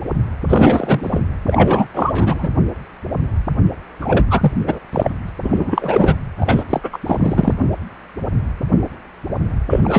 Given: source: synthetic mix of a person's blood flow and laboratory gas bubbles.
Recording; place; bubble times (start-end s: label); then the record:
Doppler ultrasound of blood flow; precordium
0.49-1.22 s: bubbles
1.46-1.87 s: bubbles
1.94-2.48 s: bubbles
4.00-4.25 s: bubbles
4.29-4.52 s: bubbles
4.67-4.79 s: bubbles
4.92-5.11 s: bubbles
5.28-5.29 s: bubbles
5.42-6.15 s: bubbles
6.39-6.63 s: bubbles
6.70-6.80 s: bubbles
6.83-6.89 s: bubbles
6.92-6.98 s: bubbles
7.06-7.54 s: bubbles
9.69-9.80 s: bubbles
9.84-9.99 s: bubbles
From the record:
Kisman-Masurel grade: 333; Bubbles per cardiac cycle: rolling drumbeat, 9 or more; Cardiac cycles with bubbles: 50 to 99%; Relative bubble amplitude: loud (0.450 to 0.775); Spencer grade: 3 (all of the cardiac periods contain showers or single bubble signals, but not dominating or overriding the cardiac motion signals); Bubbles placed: anywhere in the cardiac cycle